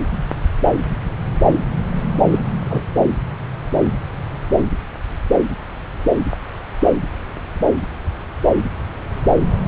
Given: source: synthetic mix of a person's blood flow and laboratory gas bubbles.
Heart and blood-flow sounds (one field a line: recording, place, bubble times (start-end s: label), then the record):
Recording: Doppler ultrasound of blood flow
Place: subclavian vein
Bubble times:
2.31-2.39 s: bubbles
2.68-2.84 s: bubbles
From the record:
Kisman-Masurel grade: 113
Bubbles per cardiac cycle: 1 to 2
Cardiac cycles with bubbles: 1 to 10%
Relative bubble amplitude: loud (0.450 to 0.775)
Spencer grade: 1 (occasional bubble signal discernible with the cardiac motion signal, with majority of cardiac periods free of bubbles)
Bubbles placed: anywhere in the cardiac cycle